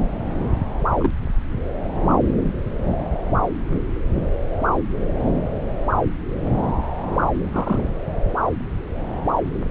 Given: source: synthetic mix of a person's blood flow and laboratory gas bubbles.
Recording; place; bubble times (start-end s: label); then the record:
Doppler ultrasound of blood flow; subclavian vein
0.98-1.11 s: bubbles
7.51-7.90 s: bubbles
From the record:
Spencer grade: 1 (occasional bubble signal discernible with the cardiac motion signal, with majority of cardiac periods free of bubbles); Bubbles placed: anywhere in the cardiac cycle